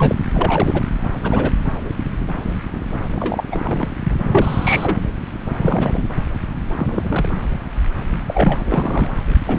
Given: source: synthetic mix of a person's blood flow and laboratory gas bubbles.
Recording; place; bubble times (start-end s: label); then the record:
Doppler ultrasound of blood flow; subclavian vein
0.00-0.15 s: bubbles
0.31-0.84 s: bubbles
1.24-1.53 s: bubbles
3.15-3.44 s: bubbles
3.52-3.88 s: bubbles
4.03-4.16 s: bubbles
4.21-4.99 s: bubbles
5.61-6.04 s: bubbles
6.78-7.45 s: bubbles
8.26-8.62 s: bubbles
8.64-9.10 s: bubbles
9.46-9.59 s: bubbles
From the record:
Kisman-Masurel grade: 232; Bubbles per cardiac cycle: several, 3 to 8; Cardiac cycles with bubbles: 50 to 99%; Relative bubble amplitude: moderate (0.250 to 0.450); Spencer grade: 3 (all of the cardiac periods contain showers or single bubble signals, but not dominating or overriding the cardiac motion signals); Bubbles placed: anywhere in the cardiac cycle